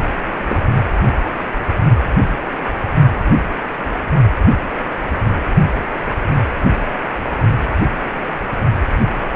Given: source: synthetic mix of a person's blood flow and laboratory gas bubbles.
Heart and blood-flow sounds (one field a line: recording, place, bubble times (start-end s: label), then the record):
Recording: Doppler ultrasound of blood flow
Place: precordium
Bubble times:
0.49-0.59 s: bubbles
From the record:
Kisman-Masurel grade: 113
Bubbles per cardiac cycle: 1 to 2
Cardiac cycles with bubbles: 1 to 10%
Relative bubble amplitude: loud (0.450 to 0.775)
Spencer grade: 1 (occasional bubble signal discernible with the cardiac motion signal, with majority of cardiac periods free of bubbles)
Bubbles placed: only in the low amplitude regions of the cardiac cycle